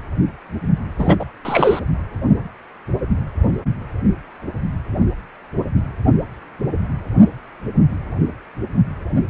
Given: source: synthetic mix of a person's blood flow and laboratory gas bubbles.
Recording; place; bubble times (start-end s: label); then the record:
Doppler ultrasound of blood flow; precordium
0.98-1.17 s: bubbles
1.19-1.25 s: bubbles
1.45-1.79 s: bubbles
From the record:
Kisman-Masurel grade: 213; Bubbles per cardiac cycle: several, 3 to 8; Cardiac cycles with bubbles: 1 to 10%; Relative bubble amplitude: loud (0.450 to 0.775); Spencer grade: 1 (occasional bubble signal discernible with the cardiac motion signal, with majority of cardiac periods free of bubbles); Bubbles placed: anywhere in the cardiac cycle